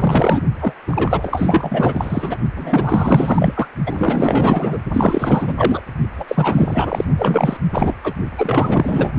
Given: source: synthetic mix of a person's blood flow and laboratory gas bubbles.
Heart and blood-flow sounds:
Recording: Doppler ultrasound of blood flow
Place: precordium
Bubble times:
0.00-0.41 s: bubbles
0.59-0.73 s: bubbles
0.87-2.38 s: bubbles
2.56-3.67 s: bubbles
3.86-4.80 s: bubbles
4.93-5.54 s: bubbles
5.57-5.82 s: bubbles
6.18-6.25 s: bubbles
6.28-7.05 s: bubbles
7.18-7.57 s: bubbles
7.73-7.94 s: bubbles
8.04-8.14 s: bubbles
8.38-9.12 s: bubbles
From the record:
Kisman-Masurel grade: 444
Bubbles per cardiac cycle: continuous sound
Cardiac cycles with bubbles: 100%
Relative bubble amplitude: maximal (0.775 to 0.999)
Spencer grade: 4 (maximum detectable bubble signal sounding continuously throughout systole and diastole of every cardiac period, and overriding the amplitude of the normal cardiac signals)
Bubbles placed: only in the low amplitude regions of the cardiac cycle

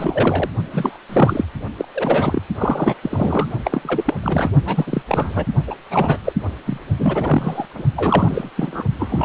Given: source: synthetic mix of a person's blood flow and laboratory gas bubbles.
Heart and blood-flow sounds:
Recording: Doppler ultrasound of blood flow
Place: precordium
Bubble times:
0.00-0.50 s: bubbles
0.72-0.97 s: bubbles
1.09-1.44 s: bubbles
1.78-1.85 s: bubbles
1.94-2.42 s: bubbles
2.57-2.94 s: bubbles
3.02-3.48 s: bubbles
3.65-4.14 s: bubbles
4.23-4.51 s: bubbles
4.65-5.03 s: bubbles
5.07-5.46 s: bubbles
5.67-5.75 s: bubbles
5.90-6.17 s: bubbles
6.24-6.33 s: bubbles
6.66-6.81 s: bubbles
6.99-7.66 s: bubbles
7.75-7.83 s: bubbles
7.96-8.50 s: bubbles
8.56-8.83 s: bubbles
8.99-9.25 s: bubbles
From the record:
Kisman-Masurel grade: 343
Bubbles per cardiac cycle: rolling drumbeat, 9 or more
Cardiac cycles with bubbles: 100%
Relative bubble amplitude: loud (0.450 to 0.775)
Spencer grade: 3 (all of the cardiac periods contain showers or single bubble signals, but not dominating or overriding the cardiac motion signals)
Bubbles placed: only in the low amplitude regions of the cardiac cycle

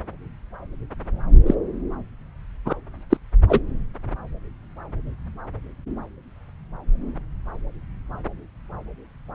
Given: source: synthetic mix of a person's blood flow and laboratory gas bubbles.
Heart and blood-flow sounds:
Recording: Doppler ultrasound of blood flow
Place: subclavian vein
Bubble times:
1.46-1.55 s: bubbles
2.65-2.73 s: bubbles
3.10-3.17 s: bubbles
3.49-3.60 s: bubbles
From the record:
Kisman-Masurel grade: 123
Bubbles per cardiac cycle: 1 to 2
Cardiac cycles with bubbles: 10 to 50%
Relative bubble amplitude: loud (0.450 to 0.775)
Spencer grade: 2 (many but less than half of the cardiac periods contain bubble signals, singularly or in groups)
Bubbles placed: anywhere in the cardiac cycle

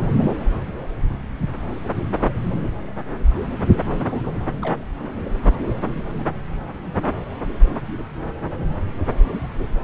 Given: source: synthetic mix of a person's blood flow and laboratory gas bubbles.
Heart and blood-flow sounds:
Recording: Doppler ultrasound of blood flow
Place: subclavian vein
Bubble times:
3.86-4.31 s: bubbles
4.62-4.77 s: bubbles
From the record:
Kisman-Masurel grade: 111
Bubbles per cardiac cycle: 1 to 2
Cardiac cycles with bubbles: 1 to 10%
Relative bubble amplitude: barely perceptible (0.100 to 0.250)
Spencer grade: 1 (occasional bubble signal discernible with the cardiac motion signal, with majority of cardiac periods free of bubbles)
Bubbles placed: anywhere in the cardiac cycle

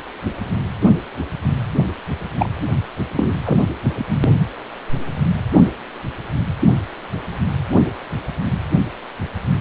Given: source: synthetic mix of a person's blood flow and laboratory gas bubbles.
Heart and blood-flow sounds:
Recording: Doppler ultrasound of blood flow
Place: precordium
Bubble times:
2.38-2.49 s: bubbles
3.16-3.36 s: bubbles
3.44-3.59 s: bubbles
From the record:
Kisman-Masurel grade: 213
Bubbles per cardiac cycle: several, 3 to 8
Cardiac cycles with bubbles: 1 to 10%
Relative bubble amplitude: loud (0.450 to 0.775)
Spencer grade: 1 (occasional bubble signal discernible with the cardiac motion signal, with majority of cardiac periods free of bubbles)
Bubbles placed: anywhere in the cardiac cycle

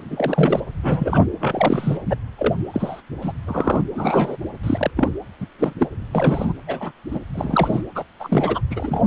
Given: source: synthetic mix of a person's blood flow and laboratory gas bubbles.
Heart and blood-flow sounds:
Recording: Doppler ultrasound of blood flow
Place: precordium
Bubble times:
0.10-0.60 s: bubbles
0.83-1.28 s: bubbles
1.40-1.98 s: bubbles
2.06-2.15 s: bubbles
2.38-2.54 s: bubbles
2.73-3.01 s: bubbles
3.21-3.33 s: bubbles
3.47-3.84 s: bubbles
3.95-4.37 s: bubbles
4.63-4.91 s: bubbles
4.96-5.08 s: bubbles
5.40-5.46 s: bubbles
5.59-5.74 s: bubbles
5.79-5.88 s: bubbles
6.12-6.53 s: bubbles
6.67-6.92 s: bubbles
7.11-7.19 s: bubbles
7.33-7.82 s: bubbles
7.95-8.04 s: bubbles
8.19-8.61 s: bubbles
8.70-9.03 s: bubbles
From the record:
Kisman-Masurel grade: 242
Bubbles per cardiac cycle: several, 3 to 8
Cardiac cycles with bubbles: 100%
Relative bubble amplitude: moderate (0.250 to 0.450)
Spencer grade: 3 (all of the cardiac periods contain showers or single bubble signals, but not dominating or overriding the cardiac motion signals)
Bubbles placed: anywhere in the cardiac cycle

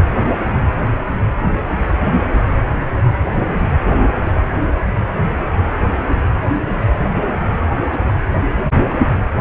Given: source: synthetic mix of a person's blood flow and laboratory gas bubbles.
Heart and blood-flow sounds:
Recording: Doppler ultrasound of blood flow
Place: precordium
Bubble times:
4.07-4.41 s: bubbles
6.40-6.90 s: bubbles
7.76-7.83 s: bubbles
7.85-8.08 s: bubbles
8.51-8.70 s: bubbles
8.90-8.95 s: bubbles
From the record:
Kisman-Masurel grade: 121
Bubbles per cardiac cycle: 1 to 2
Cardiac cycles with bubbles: 10 to 50%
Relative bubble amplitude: barely perceptible (0.100 to 0.250)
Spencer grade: 2 (many but less than half of the cardiac periods contain bubble signals, singularly or in groups)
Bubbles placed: anywhere in the cardiac cycle

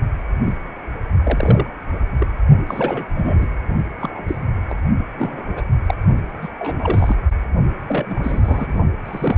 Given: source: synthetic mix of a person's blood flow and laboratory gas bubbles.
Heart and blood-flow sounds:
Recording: Doppler ultrasound of blood flow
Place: precordium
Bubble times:
0.44-0.54 s: bubbles
1.23-1.66 s: bubbles
2.19-2.27 s: bubbles
2.67-3.06 s: bubbles
3.16-3.47 s: bubbles
4.00-4.23 s: bubbles
4.28-4.38 s: bubbles
4.69-4.75 s: bubbles
5.17-5.64 s: bubbles
5.86-5.94 s: bubbles
6.41-6.49 s: bubbles
6.59-7.15 s: bubbles
7.88-8.74 s: bubbles
9.05-9.38 s: bubbles
From the record:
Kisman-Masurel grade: 242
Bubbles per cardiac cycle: several, 3 to 8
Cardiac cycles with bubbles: 100%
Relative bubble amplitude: moderate (0.250 to 0.450)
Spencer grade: 3 (all of the cardiac periods contain showers or single bubble signals, but not dominating or overriding the cardiac motion signals)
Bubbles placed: only in the low amplitude regions of the cardiac cycle

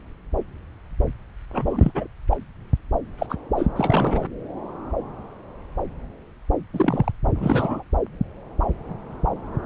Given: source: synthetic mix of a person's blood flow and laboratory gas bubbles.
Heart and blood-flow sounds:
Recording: Doppler ultrasound of blood flow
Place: subclavian vein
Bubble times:
1.52-1.92 s: bubbles
1.94-2.07 s: bubbles
2.31-2.37 s: bubbles
3.19-3.27 s: bubbles
3.29-3.35 s: bubbles
3.56-3.67 s: bubbles
3.75-4.28 s: bubbles
6.73-7.12 s: bubbles
7.35-7.83 s: bubbles
From the record:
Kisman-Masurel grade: 222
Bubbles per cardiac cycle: several, 3 to 8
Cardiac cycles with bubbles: 10 to 50%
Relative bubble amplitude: moderate (0.250 to 0.450)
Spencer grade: 2 (many but less than half of the cardiac periods contain bubble signals, singularly or in groups)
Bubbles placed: anywhere in the cardiac cycle

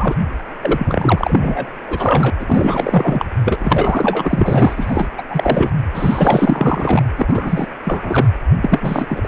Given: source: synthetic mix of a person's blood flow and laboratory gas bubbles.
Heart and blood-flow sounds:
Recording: Doppler ultrasound of blood flow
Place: precordium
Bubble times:
0.00-0.15 s: bubbles
0.61-1.73 s: bubbles
1.87-2.30 s: bubbles
2.40-3.25 s: bubbles
3.45-5.07 s: bubbles
5.18-5.23 s: bubbles
5.29-5.71 s: bubbles
5.94-7.03 s: bubbles
7.17-7.68 s: bubbles
7.85-8.29 s: bubbles
8.62-9.28 s: bubbles
From the record:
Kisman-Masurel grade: 444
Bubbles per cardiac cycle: continuous sound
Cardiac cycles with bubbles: 100%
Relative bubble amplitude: maximal (0.775 to 0.999)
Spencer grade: 4 (maximum detectable bubble signal sounding continuously throughout systole and diastole of every cardiac period, and overriding the amplitude of the normal cardiac signals)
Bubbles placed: anywhere in the cardiac cycle

